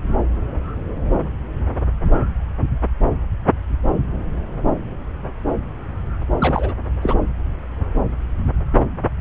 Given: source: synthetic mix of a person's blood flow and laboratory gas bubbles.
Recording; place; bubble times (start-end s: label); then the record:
Doppler ultrasound of blood flow; subclavian vein
6.39-6.72 s: bubbles
7.01-7.14 s: bubbles
From the record:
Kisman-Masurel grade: 212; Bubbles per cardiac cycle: several, 3 to 8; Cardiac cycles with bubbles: 1 to 10%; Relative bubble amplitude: moderate (0.250 to 0.450); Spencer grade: 1 (occasional bubble signal discernible with the cardiac motion signal, with majority of cardiac periods free of bubbles); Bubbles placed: anywhere in the cardiac cycle